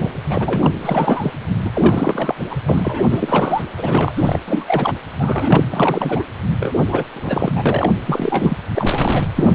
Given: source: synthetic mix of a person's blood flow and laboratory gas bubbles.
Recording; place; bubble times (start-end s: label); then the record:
Doppler ultrasound of blood flow; precordium
0.00-0.16 s: bubbles
0.29-0.70 s: bubbles
0.82-1.31 s: bubbles
1.65-1.71 s: bubbles
1.73-2.35 s: bubbles
2.50-2.56 s: bubbles
2.68-3.63 s: bubbles
3.77-4.39 s: bubbles
4.47-4.94 s: bubbles
5.19-5.66 s: bubbles
5.70-6.24 s: bubbles
6.59-6.75 s: bubbles
6.89-7.04 s: bubbles
7.13-7.91 s: bubbles
8.05-8.57 s: bubbles
8.75-9.24 s: bubbles
9.36-9.54 s: bubbles
From the record:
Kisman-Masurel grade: 342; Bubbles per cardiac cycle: rolling drumbeat, 9 or more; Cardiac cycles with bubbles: 100%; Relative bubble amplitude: moderate (0.250 to 0.450); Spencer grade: 3 (all of the cardiac periods contain showers or single bubble signals, but not dominating or overriding the cardiac motion signals); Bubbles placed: anywhere in the cardiac cycle